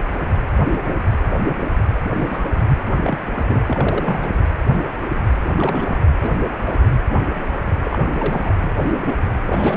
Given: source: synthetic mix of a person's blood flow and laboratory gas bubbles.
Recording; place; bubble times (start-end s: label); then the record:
Doppler ultrasound of blood flow; precordium
2.04-2.45 s: bubbles
3.00-3.19 s: bubbles
3.27-3.61 s: bubbles
3.67-4.33 s: bubbles
5.34-6.01 s: bubbles
6.22-6.30 s: bubbles
6.61-6.76 s: bubbles
7.84-7.99 s: bubbles
8.12-8.52 s: bubbles
8.75-9.02 s: bubbles
9.07-9.16 s: bubbles
9.46-9.77 s: bubbles
From the record:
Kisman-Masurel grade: 232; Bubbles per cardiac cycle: several, 3 to 8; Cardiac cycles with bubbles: 50 to 99%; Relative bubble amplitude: moderate (0.250 to 0.450); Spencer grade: 3 (all of the cardiac periods contain showers or single bubble signals, but not dominating or overriding the cardiac motion signals); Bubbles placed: anywhere in the cardiac cycle